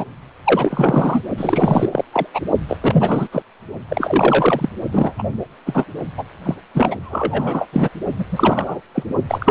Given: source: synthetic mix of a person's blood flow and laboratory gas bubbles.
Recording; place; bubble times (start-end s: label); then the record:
Doppler ultrasound of blood flow; precordium
0.00-0.04 s: bubbles
0.44-1.23 s: bubbles
1.37-1.89 s: bubbles
1.91-2.04 s: bubbles
2.12-2.26 s: bubbles
2.34-2.41 s: bubbles
2.68-2.78 s: bubbles
2.80-3.28 s: bubbles
3.32-3.42 s: bubbles
3.88-4.69 s: bubbles
4.92-5.33 s: bubbles
5.66-5.86 s: bubbles
6.17-6.24 s: bubbles
6.45-6.54 s: bubbles
6.74-6.96 s: bubbles
7.02-7.69 s: bubbles
7.73-7.89 s: bubbles
8.18-8.26 s: bubbles
8.31-8.81 s: bubbles
8.95-9.04 s: bubbles
9.27-9.51 s: bubbles
From the record:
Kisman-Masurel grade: 343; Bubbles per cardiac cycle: rolling drumbeat, 9 or more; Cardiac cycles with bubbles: 100%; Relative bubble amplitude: loud (0.450 to 0.775); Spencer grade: 3 (all of the cardiac periods contain showers or single bubble signals, but not dominating or overriding the cardiac motion signals); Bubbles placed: only in the low amplitude regions of the cardiac cycle